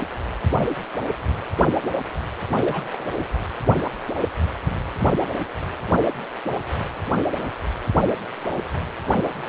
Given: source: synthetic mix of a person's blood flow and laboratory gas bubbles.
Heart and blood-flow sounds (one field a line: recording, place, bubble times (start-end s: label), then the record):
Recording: Doppler ultrasound of blood flow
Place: precordium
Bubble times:
2.53-2.82 s: bubbles
2.92-3.24 s: bubbles
From the record:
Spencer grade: 1 (occasional bubble signal discernible with the cardiac motion signal, with majority of cardiac periods free of bubbles)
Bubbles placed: anywhere in the cardiac cycle